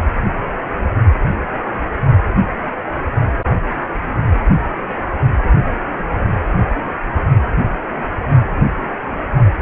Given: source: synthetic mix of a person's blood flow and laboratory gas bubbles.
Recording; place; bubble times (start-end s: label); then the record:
Doppler ultrasound of blood flow; precordium
no bubbles
From the record:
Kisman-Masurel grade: 000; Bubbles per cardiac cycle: 0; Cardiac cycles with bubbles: 0%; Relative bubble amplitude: no bubbles discernible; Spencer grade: 0 (complete lack of bubble signals)